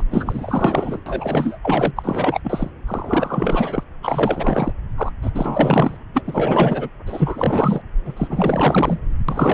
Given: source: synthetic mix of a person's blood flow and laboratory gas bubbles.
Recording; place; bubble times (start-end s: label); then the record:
Doppler ultrasound of blood flow; subclavian vein
0.00-0.03 s: bubbles
0.10-0.99 s: bubbles
1.06-1.58 s: bubbles
1.62-1.91 s: bubbles
1.96-2.40 s: bubbles
2.44-2.71 s: bubbles
2.86-3.83 s: bubbles
4.03-4.72 s: bubbles
4.97-5.12 s: bubbles
5.22-5.31 s: bubbles
5.33-5.97 s: bubbles
6.13-6.89 s: bubbles
7.06-7.81 s: bubbles
8.04-8.13 s: bubbles
8.16-9.01 s: bubbles
9.29-9.54 s: bubbles
From the record:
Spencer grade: 4 (maximum detectable bubble signal sounding continuously throughout systole and diastole of every cardiac period, and overriding the amplitude of the normal cardiac signals); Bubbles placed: anywhere in the cardiac cycle